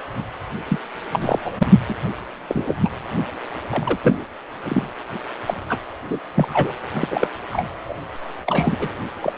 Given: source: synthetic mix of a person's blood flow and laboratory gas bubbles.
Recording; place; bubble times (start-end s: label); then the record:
Doppler ultrasound of blood flow; precordium
0.68-0.79 s: bubbles
1.12-1.39 s: bubbles
1.45-1.55 s: bubbles
1.58-1.63 s: bubbles
1.89-1.95 s: bubbles
2.49-2.74 s: bubbles
2.84-2.89 s: bubbles
3.70-3.99 s: bubbles
4.03-4.19 s: bubbles
4.63-4.87 s: bubbles
5.46-5.54 s: bubbles
5.68-5.78 s: bubbles
6.08-6.19 s: bubbles
6.35-6.72 s: bubbles
6.93-7.08 s: bubbles
7.10-7.27 s: bubbles
7.50-7.65 s: bubbles
7.88-7.94 s: bubbles
8.46-8.88 s: bubbles
9.21-9.32 s: bubbles
From the record:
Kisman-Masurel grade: 242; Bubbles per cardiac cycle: several, 3 to 8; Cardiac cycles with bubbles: 100%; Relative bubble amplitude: moderate (0.250 to 0.450); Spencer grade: 3 (all of the cardiac periods contain showers or single bubble signals, but not dominating or overriding the cardiac motion signals); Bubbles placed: anywhere in the cardiac cycle